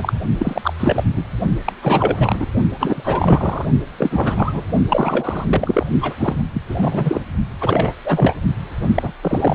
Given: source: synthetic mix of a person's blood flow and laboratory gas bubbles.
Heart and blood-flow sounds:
Doppler ultrasound of blood flow; precordium
0.00-0.13 s: bubbles
0.39-0.73 s: bubbles
0.79-1.03 s: bubbles
1.16-1.24 s: bubbles
1.65-1.72 s: bubbles
1.82-2.47 s: bubbles
2.80-3.66 s: bubbles
3.98-4.63 s: bubbles
4.88-5.45 s: bubbles
5.48-5.87 s: bubbles
6.00-6.13 s: bubbles
6.17-6.36 s: bubbles
6.54-6.62 s: bubbles
6.67-7.21 s: bubbles
7.61-7.93 s: bubbles
8.04-8.36 s: bubbles
8.82-9.17 s: bubbles
9.22-9.55 s: bubbles
From the record:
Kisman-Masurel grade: 343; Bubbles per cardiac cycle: rolling drumbeat, 9 or more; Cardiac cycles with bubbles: 100%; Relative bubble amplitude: loud (0.450 to 0.775); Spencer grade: 3 (all of the cardiac periods contain showers or single bubble signals, but not dominating or overriding the cardiac motion signals); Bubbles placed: only in the low amplitude regions of the cardiac cycle

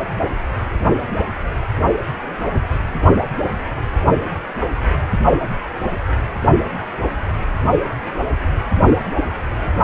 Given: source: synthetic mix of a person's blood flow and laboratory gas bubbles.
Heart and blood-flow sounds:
Doppler ultrasound of blood flow; precordium
no bubbles
From the record:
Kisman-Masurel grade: 000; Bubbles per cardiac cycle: 0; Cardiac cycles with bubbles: 0%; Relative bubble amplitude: no bubbles discernible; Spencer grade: 0 (complete lack of bubble signals)

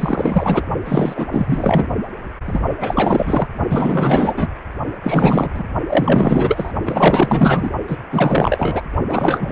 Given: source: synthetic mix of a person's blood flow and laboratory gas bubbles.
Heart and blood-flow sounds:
Doppler ultrasound of blood flow; precordium
0.00-0.65 s: bubbles
0.85-1.27 s: bubbles
1.31-1.87 s: bubbles
2.46-2.62 s: bubbles
2.80-3.48 s: bubbles
3.69-4.53 s: bubbles
5.04-5.63 s: bubbles
5.89-6.72 s: bubbles
6.85-7.71 s: bubbles
7.87-7.98 s: bubbles
8.12-8.82 s: bubbles
9.09-9.52 s: bubbles
From the record:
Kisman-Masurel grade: 444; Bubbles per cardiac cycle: continuous sound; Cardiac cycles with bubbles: 100%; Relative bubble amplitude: maximal (0.775 to 0.999); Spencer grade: 4 (maximum detectable bubble signal sounding continuously throughout systole and diastole of every cardiac period, and overriding the amplitude of the normal cardiac signals); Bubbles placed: only in the low amplitude regions of the cardiac cycle

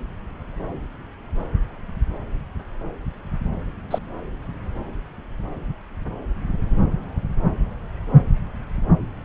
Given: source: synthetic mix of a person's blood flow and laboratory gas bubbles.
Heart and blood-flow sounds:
Doppler ultrasound of blood flow; subclavian vein
3.90-3.98 s: bubbles
From the record:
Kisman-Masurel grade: 112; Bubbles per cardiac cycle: 1 to 2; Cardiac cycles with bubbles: 1 to 10%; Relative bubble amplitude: moderate (0.250 to 0.450); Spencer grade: 1 (occasional bubble signal discernible with the cardiac motion signal, with majority of cardiac periods free of bubbles); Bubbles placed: anywhere in the cardiac cycle

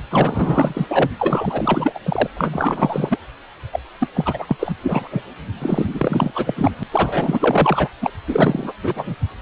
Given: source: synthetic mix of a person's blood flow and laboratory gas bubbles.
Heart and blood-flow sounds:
Doppler ultrasound of blood flow; precordium
0.10-1.10 s: bubbles
1.19-1.99 s: bubbles
2.04-2.27 s: bubbles
2.35-3.19 s: bubbles
3.72-3.79 s: bubbles
4.00-4.08 s: bubbles
4.14-4.57 s: bubbles
4.59-4.72 s: bubbles
4.83-5.08 s: bubbles
5.10-5.24 s: bubbles
5.60-6.32 s: bubbles
6.34-6.72 s: bubbles
6.79-6.83 s: bubbles
6.92-7.88 s: bubbles
8.02-8.11 s: bubbles
8.27-8.73 s: bubbles
8.82-9.15 s: bubbles
From the record:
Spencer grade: 4 (maximum detectable bubble signal sounding continuously throughout systole and diastole of every cardiac period, and overriding the amplitude of the normal cardiac signals); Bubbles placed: anywhere in the cardiac cycle

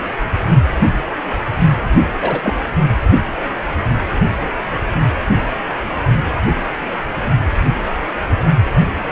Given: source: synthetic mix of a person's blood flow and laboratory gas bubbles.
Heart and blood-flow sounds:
Doppler ultrasound of blood flow; precordium
2.21-2.56 s: bubbles
From the record:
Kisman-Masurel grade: 112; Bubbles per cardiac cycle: 1 to 2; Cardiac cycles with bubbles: 1 to 10%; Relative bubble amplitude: moderate (0.250 to 0.450); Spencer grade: 1 (occasional bubble signal discernible with the cardiac motion signal, with majority of cardiac periods free of bubbles); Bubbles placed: anywhere in the cardiac cycle

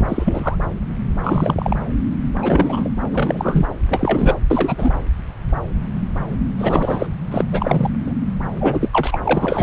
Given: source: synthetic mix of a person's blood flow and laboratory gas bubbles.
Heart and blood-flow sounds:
Doppler ultrasound of blood flow; subclavian vein
0.08-0.57 s: bubbles
1.23-1.76 s: bubbles
2.42-2.89 s: bubbles
3.12-3.67 s: bubbles
3.89-4.38 s: bubbles
4.50-4.93 s: bubbles
6.58-7.06 s: bubbles
7.30-7.44 s: bubbles
7.49-7.90 s: bubbles
8.06-8.14 s: bubbles
8.60-8.89 s: bubbles
8.93-9.21 s: bubbles
9.24-9.63 s: bubbles
From the record:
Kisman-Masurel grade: 333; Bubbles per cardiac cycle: rolling drumbeat, 9 or more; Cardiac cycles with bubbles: 50 to 99%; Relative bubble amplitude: loud (0.450 to 0.775); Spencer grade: 3 (all of the cardiac periods contain showers or single bubble signals, but not dominating or overriding the cardiac motion signals); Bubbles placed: anywhere in the cardiac cycle

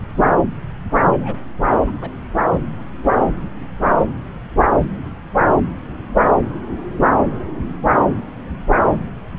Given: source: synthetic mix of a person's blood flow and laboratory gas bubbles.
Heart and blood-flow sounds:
Doppler ultrasound of blood flow; subclavian vein
1.08-1.36 s: bubbles
1.87-1.92 s: bubbles
1.96-2.12 s: bubbles
From the record:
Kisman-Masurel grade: 121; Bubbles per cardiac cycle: 1 to 2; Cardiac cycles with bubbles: 10 to 50%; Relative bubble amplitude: barely perceptible (0.100 to 0.250); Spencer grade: 2 (many but less than half of the cardiac periods contain bubble signals, singularly or in groups); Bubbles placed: anywhere in the cardiac cycle

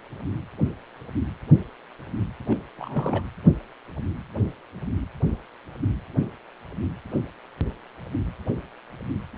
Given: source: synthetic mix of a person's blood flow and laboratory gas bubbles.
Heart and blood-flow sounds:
Doppler ultrasound of blood flow; precordium
2.48-2.57 s: bubbles
2.78-3.24 s: bubbles
From the record:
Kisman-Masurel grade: 211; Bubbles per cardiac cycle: several, 3 to 8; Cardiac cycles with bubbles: 1 to 10%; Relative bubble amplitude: barely perceptible (0.100 to 0.250); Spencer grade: 1 (occasional bubble signal discernible with the cardiac motion signal, with majority of cardiac periods free of bubbles); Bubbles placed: anywhere in the cardiac cycle

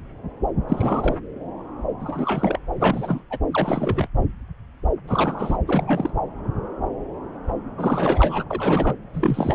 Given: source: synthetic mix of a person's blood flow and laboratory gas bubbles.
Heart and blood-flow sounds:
Doppler ultrasound of blood flow; subclavian vein
0.68-1.17 s: bubbles
2.00-2.58 s: bubbles
2.77-3.21 s: bubbles
3.30-3.38 s: bubbles
3.51-4.08 s: bubbles
5.07-5.57 s: bubbles
5.66-6.12 s: bubbles
7.78-8.44 s: bubbles
8.50-8.95 s: bubbles
9.13-9.54 s: bubbles
From the record:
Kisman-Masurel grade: 332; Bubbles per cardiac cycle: rolling drumbeat, 9 or more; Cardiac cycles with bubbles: 50 to 99%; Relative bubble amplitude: moderate (0.250 to 0.450); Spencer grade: 3 (all of the cardiac periods contain showers or single bubble signals, but not dominating or overriding the cardiac motion signals); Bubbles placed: anywhere in the cardiac cycle

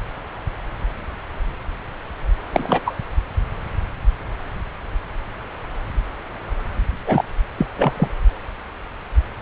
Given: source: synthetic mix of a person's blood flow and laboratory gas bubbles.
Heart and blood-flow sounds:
Doppler ultrasound of blood flow; subclavian vein
2.52-2.80 s: bubbles
2.85-2.94 s: bubbles
7.05-7.25 s: bubbles
7.58-7.66 s: bubbles
7.78-7.93 s: bubbles
7.96-8.08 s: bubbles
From the record:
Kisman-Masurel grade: 223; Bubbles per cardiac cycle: several, 3 to 8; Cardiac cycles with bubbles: 10 to 50%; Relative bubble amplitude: loud (0.450 to 0.775); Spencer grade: 2 (many but less than half of the cardiac periods contain bubble signals, singularly or in groups); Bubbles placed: anywhere in the cardiac cycle

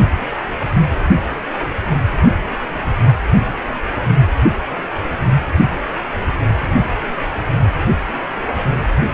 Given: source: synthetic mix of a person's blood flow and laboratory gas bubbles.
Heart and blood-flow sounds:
Doppler ultrasound of blood flow; precordium
no bubbles
From the record:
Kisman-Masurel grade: 000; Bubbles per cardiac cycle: 0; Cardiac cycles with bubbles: 0%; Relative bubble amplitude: no bubbles discernible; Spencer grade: 0 (complete lack of bubble signals)

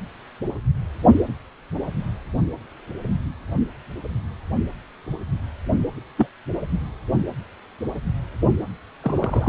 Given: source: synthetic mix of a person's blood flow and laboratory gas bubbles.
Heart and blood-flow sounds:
Doppler ultrasound of blood flow; precordium
6.17-6.27 s: bubbles
9.02-9.49 s: bubbles
From the record:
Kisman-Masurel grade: 122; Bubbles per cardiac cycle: 1 to 2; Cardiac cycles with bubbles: 10 to 50%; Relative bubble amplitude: moderate (0.250 to 0.450); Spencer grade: 2 (many but less than half of the cardiac periods contain bubble signals, singularly or in groups); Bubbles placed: only in the low amplitude regions of the cardiac cycle

